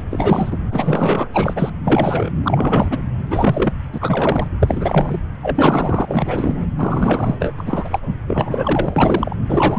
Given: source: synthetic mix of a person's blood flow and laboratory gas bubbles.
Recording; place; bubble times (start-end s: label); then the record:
Doppler ultrasound of blood flow; subclavian vein
0.00-0.04 s: bubbles
0.11-0.57 s: bubbles
0.70-1.27 s: bubbles
1.33-1.54 s: bubbles
1.56-1.70 s: bubbles
1.85-2.29 s: bubbles
2.43-3.02 s: bubbles
3.30-3.73 s: bubbles
3.93-4.50 s: bubbles
4.60-5.20 s: bubbles
5.42-6.58 s: bubbles
6.78-7.35 s: bubbles
7.39-7.54 s: bubbles
7.58-7.99 s: bubbles
8.26-9.36 s: bubbles
9.48-9.79 s: bubbles
From the record:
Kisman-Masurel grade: 343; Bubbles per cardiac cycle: rolling drumbeat, 9 or more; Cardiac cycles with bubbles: 100%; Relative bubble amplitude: loud (0.450 to 0.775); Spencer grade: 3 (all of the cardiac periods contain showers or single bubble signals, but not dominating or overriding the cardiac motion signals); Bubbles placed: anywhere in the cardiac cycle